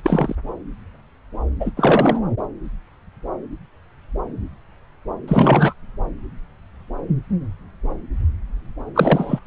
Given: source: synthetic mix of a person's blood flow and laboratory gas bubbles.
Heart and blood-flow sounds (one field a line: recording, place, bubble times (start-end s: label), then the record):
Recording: Doppler ultrasound of blood flow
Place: subclavian vein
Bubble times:
0.03-0.35 s: bubbles
1.60-1.71 s: bubbles
1.77-2.21 s: bubbles
5.28-5.74 s: bubbles
8.95-9.39 s: bubbles
From the record:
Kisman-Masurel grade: 223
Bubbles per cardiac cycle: several, 3 to 8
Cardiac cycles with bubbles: 10 to 50%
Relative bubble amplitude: loud (0.450 to 0.775)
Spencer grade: 2 (many but less than half of the cardiac periods contain bubble signals, singularly or in groups)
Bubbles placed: anywhere in the cardiac cycle